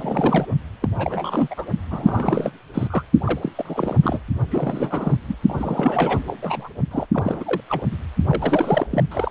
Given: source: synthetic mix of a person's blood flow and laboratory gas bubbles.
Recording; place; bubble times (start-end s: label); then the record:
Doppler ultrasound of blood flow; precordium
0.00-0.45 s: bubbles
0.82-0.89 s: bubbles
0.97-1.48 s: bubbles
1.50-1.65 s: bubbles
1.90-2.51 s: bubbles
2.74-2.88 s: bubbles
2.90-3.03 s: bubbles
3.24-3.52 s: bubbles
3.55-3.97 s: bubbles
4.03-4.19 s: bubbles
4.50-5.17 s: bubbles
5.27-5.36 s: bubbles
5.49-5.54 s: bubbles
5.58-6.20 s: bubbles
6.27-6.32 s: bubbles
6.42-6.69 s: bubbles
6.91-7.06 s: bubbles
7.14-7.60 s: bubbles
7.69-7.82 s: bubbles
7.92-7.97 s: bubbles
8.29-8.87 s: bubbles
8.90-9.04 s: bubbles
9.11-9.31 s: bubbles
From the record:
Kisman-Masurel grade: 342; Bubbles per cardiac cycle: rolling drumbeat, 9 or more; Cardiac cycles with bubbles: 100%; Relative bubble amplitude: moderate (0.250 to 0.450); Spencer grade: 3 (all of the cardiac periods contain showers or single bubble signals, but not dominating or overriding the cardiac motion signals); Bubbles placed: only in the low amplitude regions of the cardiac cycle